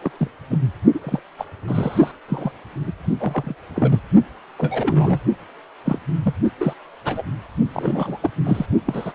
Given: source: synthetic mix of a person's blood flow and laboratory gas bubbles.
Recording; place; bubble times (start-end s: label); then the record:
Doppler ultrasound of blood flow; precordium
0.02-0.11 s: bubbles
0.18-0.28 s: bubbles
0.51-0.58 s: bubbles
0.94-0.99 s: bubbles
1.04-1.19 s: bubbles
1.38-1.45 s: bubbles
1.67-2.11 s: bubbles
2.28-2.51 s: bubbles
2.87-2.92 s: bubbles
3.17-3.54 s: bubbles
3.75-4.00 s: bubbles
4.58-5.20 s: bubbles
5.84-5.99 s: bubbles
6.22-6.34 s: bubbles
6.59-6.74 s: bubbles
7.04-7.22 s: bubbles
7.73-8.18 s: bubbles
8.22-8.31 s: bubbles
8.44-8.66 s: bubbles
8.86-9.12 s: bubbles
From the record:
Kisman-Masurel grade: 242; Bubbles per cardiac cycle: several, 3 to 8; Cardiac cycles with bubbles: 100%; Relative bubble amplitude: moderate (0.250 to 0.450); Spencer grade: 3 (all of the cardiac periods contain showers or single bubble signals, but not dominating or overriding the cardiac motion signals); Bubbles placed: only in the low amplitude regions of the cardiac cycle